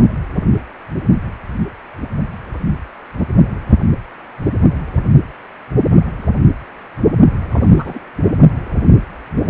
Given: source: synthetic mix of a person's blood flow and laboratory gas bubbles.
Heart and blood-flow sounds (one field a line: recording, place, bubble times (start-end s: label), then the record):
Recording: Doppler ultrasound of blood flow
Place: precordium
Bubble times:
7.50-7.59 s: bubbles
7.62-7.99 s: bubbles
From the record:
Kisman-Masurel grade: 211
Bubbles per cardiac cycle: several, 3 to 8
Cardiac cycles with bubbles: 1 to 10%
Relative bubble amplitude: barely perceptible (0.100 to 0.250)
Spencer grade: 1 (occasional bubble signal discernible with the cardiac motion signal, with majority of cardiac periods free of bubbles)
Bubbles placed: only in the low amplitude regions of the cardiac cycle